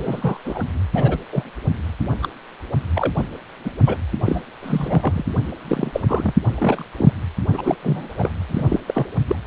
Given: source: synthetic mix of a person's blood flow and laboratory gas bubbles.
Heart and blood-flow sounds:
Doppler ultrasound of blood flow; precordium
0.00-0.38 s: bubbles
0.45-0.65 s: bubbles
0.93-1.19 s: bubbles
1.32-1.44 s: bubbles
2.21-2.28 s: bubbles
2.94-3.11 s: bubbles
3.17-3.25 s: bubbles
3.64-3.71 s: bubbles
3.86-3.97 s: bubbles
4.25-4.42 s: bubbles
4.62-5.25 s: bubbles
5.65-6.01 s: bubbles
6.08-6.33 s: bubbles
6.55-6.86 s: bubbles
6.97-7.12 s: bubbles
7.53-7.75 s: bubbles
7.83-8.08 s: bubbles
8.18-8.31 s: bubbles
8.48-8.80 s: bubbles
8.87-9.06 s: bubbles
9.28-9.36 s: bubbles
From the record:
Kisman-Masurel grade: 243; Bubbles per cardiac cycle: several, 3 to 8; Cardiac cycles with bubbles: 100%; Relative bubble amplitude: loud (0.450 to 0.775); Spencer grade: 3 (all of the cardiac periods contain showers or single bubble signals, but not dominating or overriding the cardiac motion signals); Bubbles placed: anywhere in the cardiac cycle

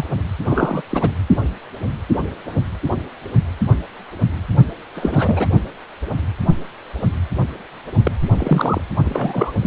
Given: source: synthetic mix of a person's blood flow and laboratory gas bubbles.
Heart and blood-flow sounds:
Doppler ultrasound of blood flow; precordium
0.00-0.05 s: bubbles
0.44-0.82 s: bubbles
0.89-1.12 s: bubbles
4.95-5.47 s: bubbles
8.03-8.12 s: bubbles
8.38-8.81 s: bubbles
9.06-9.53 s: bubbles
9.62-9.67 s: bubbles
From the record:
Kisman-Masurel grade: 332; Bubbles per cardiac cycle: rolling drumbeat, 9 or more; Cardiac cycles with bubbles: 50 to 99%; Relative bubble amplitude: moderate (0.250 to 0.450); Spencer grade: 3 (all of the cardiac periods contain showers or single bubble signals, but not dominating or overriding the cardiac motion signals); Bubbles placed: only in the low amplitude regions of the cardiac cycle

